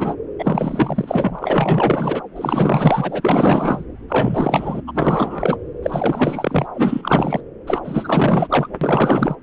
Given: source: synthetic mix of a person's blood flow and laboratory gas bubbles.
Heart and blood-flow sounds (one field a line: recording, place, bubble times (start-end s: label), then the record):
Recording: Doppler ultrasound of blood flow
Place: subclavian vein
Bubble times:
0.00-0.15 s: bubbles
0.38-2.22 s: bubbles
2.35-3.84 s: bubbles
4.08-4.81 s: bubbles
4.87-5.57 s: bubbles
5.82-6.67 s: bubbles
6.74-7.40 s: bubbles
7.67-7.81 s: bubbles
7.84-8.68 s: bubbles
8.81-9.36 s: bubbles
From the record:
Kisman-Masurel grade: 444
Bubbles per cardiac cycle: continuous sound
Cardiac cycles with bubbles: 100%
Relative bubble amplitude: maximal (0.775 to 0.999)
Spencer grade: 4 (maximum detectable bubble signal sounding continuously throughout systole and diastole of every cardiac period, and overriding the amplitude of the normal cardiac signals)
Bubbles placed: anywhere in the cardiac cycle